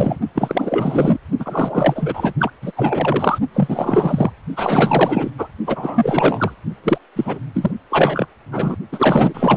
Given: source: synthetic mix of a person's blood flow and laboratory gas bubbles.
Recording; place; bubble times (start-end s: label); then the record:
Doppler ultrasound of blood flow; precordium
0.00-0.19 s: bubbles
0.35-1.18 s: bubbles
1.39-2.33 s: bubbles
2.38-2.50 s: bubbles
2.61-2.72 s: bubbles
2.76-3.38 s: bubbles
3.54-4.31 s: bubbles
4.56-5.31 s: bubbles
5.38-5.48 s: bubbles
5.67-6.55 s: bubbles
6.83-6.98 s: bubbles
7.16-7.39 s: bubbles
7.54-7.71 s: bubbles
7.89-8.27 s: bubbles
8.52-8.76 s: bubbles
8.92-9.57 s: bubbles
From the record:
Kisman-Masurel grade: 444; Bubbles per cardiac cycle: continuous sound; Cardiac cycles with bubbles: 100%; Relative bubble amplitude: maximal (0.775 to 0.999); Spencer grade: 4 (maximum detectable bubble signal sounding continuously throughout systole and diastole of every cardiac period, and overriding the amplitude of the normal cardiac signals); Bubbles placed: only in the low amplitude regions of the cardiac cycle